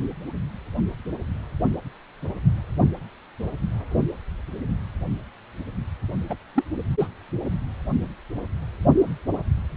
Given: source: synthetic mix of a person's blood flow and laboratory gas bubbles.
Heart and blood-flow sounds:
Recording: Doppler ultrasound of blood flow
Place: precordium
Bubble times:
6.29-6.37 s: bubbles
6.55-6.64 s: bubbles
6.99-7.07 s: bubbles
From the record:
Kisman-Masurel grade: 212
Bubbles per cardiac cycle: several, 3 to 8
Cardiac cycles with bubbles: 1 to 10%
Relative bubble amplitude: moderate (0.250 to 0.450)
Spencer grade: 1 (occasional bubble signal discernible with the cardiac motion signal, with majority of cardiac periods free of bubbles)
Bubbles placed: anywhere in the cardiac cycle

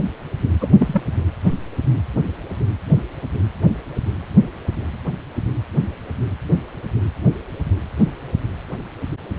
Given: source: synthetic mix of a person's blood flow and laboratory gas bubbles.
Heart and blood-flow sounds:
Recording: Doppler ultrasound of blood flow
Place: precordium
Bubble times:
0.60-0.68 s: bubbles
0.79-1.02 s: bubbles
From the record:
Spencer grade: 1 (occasional bubble signal discernible with the cardiac motion signal, with majority of cardiac periods free of bubbles)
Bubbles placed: anywhere in the cardiac cycle

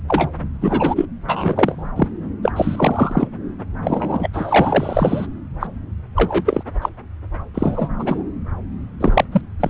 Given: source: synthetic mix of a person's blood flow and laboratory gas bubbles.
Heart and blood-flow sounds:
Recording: Doppler ultrasound of blood flow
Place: subclavian vein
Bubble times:
0.07-0.29 s: bubbles
0.60-1.05 s: bubbles
1.28-1.90 s: bubbles
1.96-2.08 s: bubbles
2.42-2.52 s: bubbles
2.56-3.27 s: bubbles
3.84-4.28 s: bubbles
4.33-5.26 s: bubbles
5.60-5.67 s: bubbles
6.16-6.63 s: bubbles
6.82-6.89 s: bubbles
7.54-7.89 s: bubbles
7.99-8.23 s: bubbles
9.00-9.24 s: bubbles
9.31-9.41 s: bubbles
9.60-9.70 s: bubbles
From the record:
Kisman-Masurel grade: 243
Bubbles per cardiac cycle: several, 3 to 8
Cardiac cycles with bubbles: 100%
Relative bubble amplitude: loud (0.450 to 0.775)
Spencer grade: 3 (all of the cardiac periods contain showers or single bubble signals, but not dominating or overriding the cardiac motion signals)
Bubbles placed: anywhere in the cardiac cycle

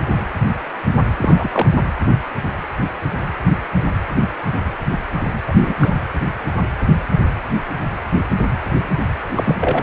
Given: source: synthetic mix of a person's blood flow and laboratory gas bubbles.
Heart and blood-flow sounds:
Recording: Doppler ultrasound of blood flow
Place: precordium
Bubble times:
1.17-1.67 s: bubbles
5.47-5.53 s: bubbles
5.61-5.76 s: bubbles
5.80-5.93 s: bubbles
9.36-9.56 s: bubbles
9.61-9.83 s: bubbles
From the record:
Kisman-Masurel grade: 223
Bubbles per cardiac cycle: several, 3 to 8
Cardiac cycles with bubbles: 10 to 50%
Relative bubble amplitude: loud (0.450 to 0.775)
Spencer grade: 2 (many but less than half of the cardiac periods contain bubble signals, singularly or in groups)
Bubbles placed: anywhere in the cardiac cycle

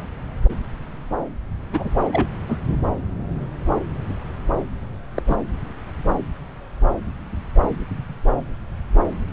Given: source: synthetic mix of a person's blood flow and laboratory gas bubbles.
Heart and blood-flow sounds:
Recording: Doppler ultrasound of blood flow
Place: subclavian vein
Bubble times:
1.73-1.90 s: bubbles
2.12-2.29 s: bubbles
2.48-2.57 s: bubbles
5.15-5.22 s: bubbles
5.27-5.36 s: bubbles
From the record:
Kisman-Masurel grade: 122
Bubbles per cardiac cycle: 1 to 2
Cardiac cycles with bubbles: 10 to 50%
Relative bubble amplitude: moderate (0.250 to 0.450)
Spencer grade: 2 (many but less than half of the cardiac periods contain bubble signals, singularly or in groups)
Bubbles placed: anywhere in the cardiac cycle

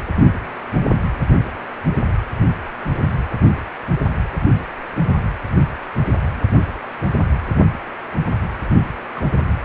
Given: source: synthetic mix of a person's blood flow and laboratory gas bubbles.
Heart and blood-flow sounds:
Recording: Doppler ultrasound of blood flow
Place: precordium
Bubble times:
9.15-9.22 s: bubbles
From the record:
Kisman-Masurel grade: 111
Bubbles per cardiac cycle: 1 to 2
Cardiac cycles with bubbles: 1 to 10%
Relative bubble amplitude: barely perceptible (0.100 to 0.250)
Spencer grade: 1 (occasional bubble signal discernible with the cardiac motion signal, with majority of cardiac periods free of bubbles)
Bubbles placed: anywhere in the cardiac cycle

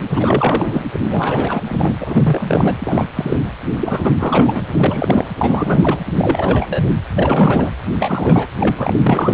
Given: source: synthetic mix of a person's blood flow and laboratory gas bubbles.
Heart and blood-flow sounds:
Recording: Doppler ultrasound of blood flow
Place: precordium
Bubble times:
0.00-0.02 s: bubbles
0.09-0.85 s: bubbles
1.09-1.63 s: bubbles
1.68-1.95 s: bubbles
1.99-2.75 s: bubbles
2.79-3.06 s: bubbles
3.16-3.37 s: bubbles
3.80-4.12 s: bubbles
4.18-4.65 s: bubbles
4.74-5.27 s: bubbles
5.38-5.98 s: bubbles
6.17-6.98 s: bubbles
7.16-7.70 s: bubbles
7.98-8.46 s: bubbles
8.60-8.75 s: bubbles
8.78-8.99 s: bubbles
9.06-9.34 s: bubbles
From the record:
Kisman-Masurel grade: 343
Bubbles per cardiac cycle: rolling drumbeat, 9 or more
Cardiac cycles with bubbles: 100%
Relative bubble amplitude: loud (0.450 to 0.775)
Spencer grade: 3 (all of the cardiac periods contain showers or single bubble signals, but not dominating or overriding the cardiac motion signals)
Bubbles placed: anywhere in the cardiac cycle

